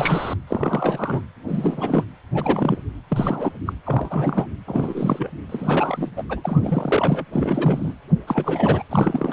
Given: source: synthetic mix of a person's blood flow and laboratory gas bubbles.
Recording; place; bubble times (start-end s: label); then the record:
Doppler ultrasound of blood flow; precordium
0.00-0.35 s: bubbles
0.47-1.22 s: bubbles
1.47-2.04 s: bubbles
2.33-2.81 s: bubbles
3.08-3.52 s: bubbles
3.66-3.73 s: bubbles
3.86-4.46 s: bubbles
4.67-5.29 s: bubbles
5.49-6.09 s: bubbles
6.17-6.24 s: bubbles
6.29-7.25 s: bubbles
7.33-7.94 s: bubbles
8.27-8.83 s: bubbles
8.89-9.33 s: bubbles
From the record:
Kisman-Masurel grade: 342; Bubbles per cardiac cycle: rolling drumbeat, 9 or more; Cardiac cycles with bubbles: 100%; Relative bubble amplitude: moderate (0.250 to 0.450); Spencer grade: 3 (all of the cardiac periods contain showers or single bubble signals, but not dominating or overriding the cardiac motion signals); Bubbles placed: anywhere in the cardiac cycle